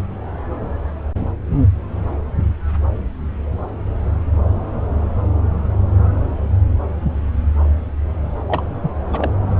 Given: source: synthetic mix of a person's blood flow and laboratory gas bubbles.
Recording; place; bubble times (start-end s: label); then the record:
Doppler ultrasound of blood flow; subclavian vein
8.48-8.62 s: bubbles
8.81-8.91 s: bubbles
9.12-9.31 s: bubbles
From the record:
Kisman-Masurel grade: 212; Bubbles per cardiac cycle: several, 3 to 8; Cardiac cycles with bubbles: 1 to 10%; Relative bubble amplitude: moderate (0.250 to 0.450); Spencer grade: 1 (occasional bubble signal discernible with the cardiac motion signal, with majority of cardiac periods free of bubbles); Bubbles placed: anywhere in the cardiac cycle